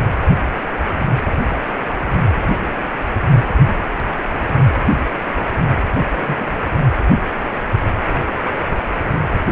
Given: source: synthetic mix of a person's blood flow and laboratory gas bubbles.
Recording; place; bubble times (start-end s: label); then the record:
Doppler ultrasound of blood flow; precordium
6.12-6.46 s: bubbles
From the record:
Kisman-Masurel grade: 121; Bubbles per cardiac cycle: 1 to 2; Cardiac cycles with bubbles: 10 to 50%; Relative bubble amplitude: barely perceptible (0.100 to 0.250); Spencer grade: 2 (many but less than half of the cardiac periods contain bubble signals, singularly or in groups); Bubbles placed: anywhere in the cardiac cycle